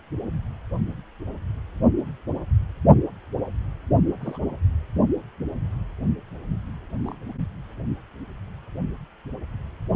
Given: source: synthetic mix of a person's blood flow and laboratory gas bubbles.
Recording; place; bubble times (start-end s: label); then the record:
Doppler ultrasound of blood flow; precordium
4.21-4.38 s: bubbles
7.04-7.17 s: bubbles
From the record:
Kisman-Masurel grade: 121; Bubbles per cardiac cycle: 1 to 2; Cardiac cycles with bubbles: 10 to 50%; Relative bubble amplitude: barely perceptible (0.100 to 0.250); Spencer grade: 2 (many but less than half of the cardiac periods contain bubble signals, singularly or in groups); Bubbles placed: only in the low amplitude regions of the cardiac cycle